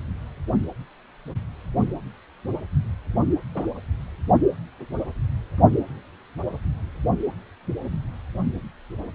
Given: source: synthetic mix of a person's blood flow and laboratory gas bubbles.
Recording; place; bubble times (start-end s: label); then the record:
Doppler ultrasound of blood flow; precordium
3.54-3.64 s: bubbles
From the record:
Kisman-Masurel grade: 112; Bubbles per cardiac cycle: 1 to 2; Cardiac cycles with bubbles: 1 to 10%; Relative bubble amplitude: moderate (0.250 to 0.450); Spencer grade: 1 (occasional bubble signal discernible with the cardiac motion signal, with majority of cardiac periods free of bubbles); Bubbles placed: only in the low amplitude regions of the cardiac cycle